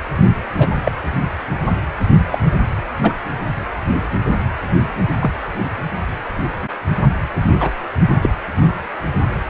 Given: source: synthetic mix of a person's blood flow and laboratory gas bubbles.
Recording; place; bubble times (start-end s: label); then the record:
Doppler ultrasound of blood flow; precordium
0.57-0.70 s: bubbles
0.83-0.92 s: bubbles
2.32-2.38 s: bubbles
3.02-3.15 s: bubbles
5.20-5.31 s: bubbles
7.01-7.14 s: bubbles
7.60-7.71 s: bubbles
8.21-8.29 s: bubbles
From the record:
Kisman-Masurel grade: 123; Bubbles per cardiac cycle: 1 to 2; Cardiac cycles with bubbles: 10 to 50%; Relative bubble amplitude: loud (0.450 to 0.775); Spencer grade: 2 (many but less than half of the cardiac periods contain bubble signals, singularly or in groups); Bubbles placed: only in the low amplitude regions of the cardiac cycle